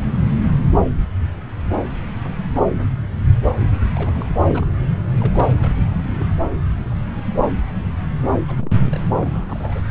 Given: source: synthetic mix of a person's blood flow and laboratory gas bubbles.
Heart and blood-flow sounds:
Doppler ultrasound of blood flow; subclavian vein
3.96-4.26 s: bubbles
4.29-4.42 s: bubbles
4.50-4.67 s: bubbles
5.20-5.48 s: bubbles
5.59-5.74 s: bubbles
5.83-6.36 s: bubbles
8.25-8.32 s: bubbles
8.47-8.56 s: bubbles
8.58-8.98 s: bubbles
9.14-9.81 s: bubbles
From the record:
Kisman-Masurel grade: 221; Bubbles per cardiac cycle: several, 3 to 8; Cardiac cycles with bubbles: 10 to 50%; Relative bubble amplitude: barely perceptible (0.100 to 0.250); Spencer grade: 2 (many but less than half of the cardiac periods contain bubble signals, singularly or in groups); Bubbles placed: anywhere in the cardiac cycle

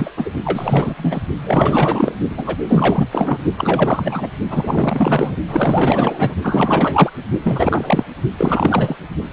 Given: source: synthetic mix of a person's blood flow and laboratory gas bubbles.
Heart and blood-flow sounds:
Doppler ultrasound of blood flow; precordium
0.00-0.11 s: bubbles
0.16-0.30 s: bubbles
0.44-0.95 s: bubbles
0.97-1.23 s: bubbles
1.37-2.15 s: bubbles
2.29-3.09 s: bubbles
3.11-3.38 s: bubbles
3.57-4.28 s: bubbles
4.50-5.36 s: bubbles
5.47-6.36 s: bubbles
6.43-7.10 s: bubbles
7.43-8.05 s: bubbles
8.38-8.96 s: bubbles
From the record:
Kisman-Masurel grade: 444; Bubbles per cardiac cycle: continuous sound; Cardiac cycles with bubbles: 100%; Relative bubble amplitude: maximal (0.775 to 0.999); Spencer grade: 4 (maximum detectable bubble signal sounding continuously throughout systole and diastole of every cardiac period, and overriding the amplitude of the normal cardiac signals); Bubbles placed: only in the low amplitude regions of the cardiac cycle

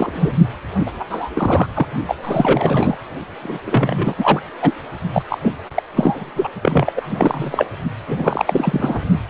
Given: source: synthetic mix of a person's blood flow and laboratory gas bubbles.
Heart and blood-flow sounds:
Doppler ultrasound of blood flow; precordium
0.00-0.32 s: bubbles
0.79-0.92 s: bubbles
0.99-1.04 s: bubbles
1.09-1.29 s: bubbles
1.34-1.67 s: bubbles
1.75-1.87 s: bubbles
2.06-2.17 s: bubbles
2.23-2.95 s: bubbles
3.42-3.59 s: bubbles
3.66-4.15 s: bubbles
4.18-4.42 s: bubbles
4.62-4.74 s: bubbles
5.12-5.22 s: bubbles
5.29-5.38 s: bubbles
5.42-5.55 s: bubbles
5.75-5.83 s: bubbles
5.96-6.31 s: bubbles
6.36-6.49 s: bubbles
6.62-6.92 s: bubbles
6.96-7.67 s: bubbles
8.07-9.00 s: bubbles
From the record:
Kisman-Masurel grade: 343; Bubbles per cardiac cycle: rolling drumbeat, 9 or more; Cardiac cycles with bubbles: 100%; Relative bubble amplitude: loud (0.450 to 0.775); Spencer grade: 3 (all of the cardiac periods contain showers or single bubble signals, but not dominating or overriding the cardiac motion signals); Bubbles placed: only in the low amplitude regions of the cardiac cycle

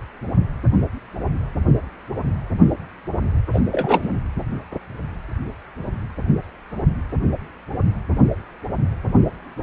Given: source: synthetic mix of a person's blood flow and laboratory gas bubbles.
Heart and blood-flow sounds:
Doppler ultrasound of blood flow; precordium
3.53-3.59 s: bubbles
3.71-4.09 s: bubbles
From the record:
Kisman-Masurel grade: 212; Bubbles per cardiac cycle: several, 3 to 8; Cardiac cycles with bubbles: 1 to 10%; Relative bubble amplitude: moderate (0.250 to 0.450); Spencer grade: 1 (occasional bubble signal discernible with the cardiac motion signal, with majority of cardiac periods free of bubbles); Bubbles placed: anywhere in the cardiac cycle

